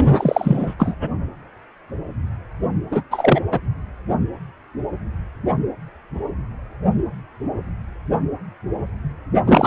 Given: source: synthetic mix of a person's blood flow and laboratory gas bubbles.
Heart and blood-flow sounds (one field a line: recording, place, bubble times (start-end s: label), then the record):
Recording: Doppler ultrasound of blood flow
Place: precordium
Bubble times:
0.17-0.74 s: bubbles
0.79-0.95 s: bubbles
2.91-3.02 s: bubbles
3.10-3.42 s: bubbles
3.52-3.60 s: bubbles
9.46-9.67 s: bubbles
From the record:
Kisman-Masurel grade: 223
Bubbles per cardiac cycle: several, 3 to 8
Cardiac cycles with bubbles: 10 to 50%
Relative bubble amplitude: loud (0.450 to 0.775)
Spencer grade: 2 (many but less than half of the cardiac periods contain bubble signals, singularly or in groups)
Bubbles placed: only in the low amplitude regions of the cardiac cycle